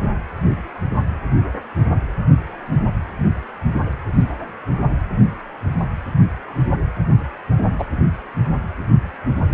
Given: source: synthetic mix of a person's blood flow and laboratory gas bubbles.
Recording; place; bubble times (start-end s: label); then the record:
Doppler ultrasound of blood flow; precordium
7.79-7.84 s: bubbles
From the record:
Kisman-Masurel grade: 123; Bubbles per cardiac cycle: 1 to 2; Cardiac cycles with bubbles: 10 to 50%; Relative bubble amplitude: loud (0.450 to 0.775); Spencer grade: 2 (many but less than half of the cardiac periods contain bubble signals, singularly or in groups); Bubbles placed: anywhere in the cardiac cycle